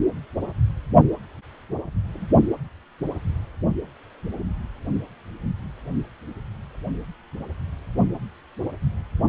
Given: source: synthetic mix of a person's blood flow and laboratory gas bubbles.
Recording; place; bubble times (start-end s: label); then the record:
Doppler ultrasound of blood flow; precordium
2.13-2.29 s: bubbles
From the record:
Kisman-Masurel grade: 121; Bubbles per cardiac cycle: 1 to 2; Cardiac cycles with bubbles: 10 to 50%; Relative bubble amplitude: barely perceptible (0.100 to 0.250); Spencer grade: 2 (many but less than half of the cardiac periods contain bubble signals, singularly or in groups); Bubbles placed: only in the low amplitude regions of the cardiac cycle